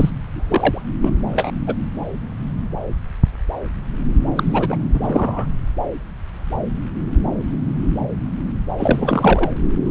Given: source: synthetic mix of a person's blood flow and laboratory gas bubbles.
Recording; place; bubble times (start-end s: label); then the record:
Doppler ultrasound of blood flow; subclavian vein
0.00-0.10 s: bubbles
0.32-0.82 s: bubbles
1.02-1.15 s: bubbles
1.33-1.51 s: bubbles
1.67-1.75 s: bubbles
4.36-4.78 s: bubbles
4.94-5.00 s: bubbles
5.02-5.46 s: bubbles
8.77-9.50 s: bubbles
From the record:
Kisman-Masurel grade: 232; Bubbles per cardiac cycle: several, 3 to 8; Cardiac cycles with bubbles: 50 to 99%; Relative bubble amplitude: moderate (0.250 to 0.450); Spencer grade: 3 (all of the cardiac periods contain showers or single bubble signals, but not dominating or overriding the cardiac motion signals); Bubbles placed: anywhere in the cardiac cycle